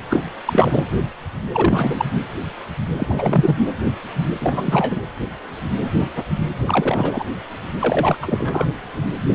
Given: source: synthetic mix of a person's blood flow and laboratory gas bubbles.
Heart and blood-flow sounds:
Doppler ultrasound of blood flow; precordium
0.09-0.23 s: bubbles
0.45-0.85 s: bubbles
1.53-2.05 s: bubbles
2.96-3.72 s: bubbles
4.40-5.01 s: bubbles
6.65-7.25 s: bubbles
7.79-8.16 s: bubbles
8.21-8.66 s: bubbles
From the record:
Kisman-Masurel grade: 333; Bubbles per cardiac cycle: rolling drumbeat, 9 or more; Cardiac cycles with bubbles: 50 to 99%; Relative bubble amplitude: loud (0.450 to 0.775); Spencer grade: 3 (all of the cardiac periods contain showers or single bubble signals, but not dominating or overriding the cardiac motion signals); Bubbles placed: anywhere in the cardiac cycle

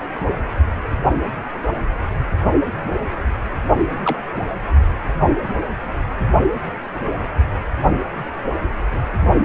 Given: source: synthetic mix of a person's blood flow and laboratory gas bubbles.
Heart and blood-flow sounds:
Doppler ultrasound of blood flow; precordium
4.04-4.20 s: bubbles
From the record:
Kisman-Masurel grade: 112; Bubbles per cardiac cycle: 1 to 2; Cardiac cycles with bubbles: 1 to 10%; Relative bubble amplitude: moderate (0.250 to 0.450); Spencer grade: 1 (occasional bubble signal discernible with the cardiac motion signal, with majority of cardiac periods free of bubbles); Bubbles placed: only in the low amplitude regions of the cardiac cycle

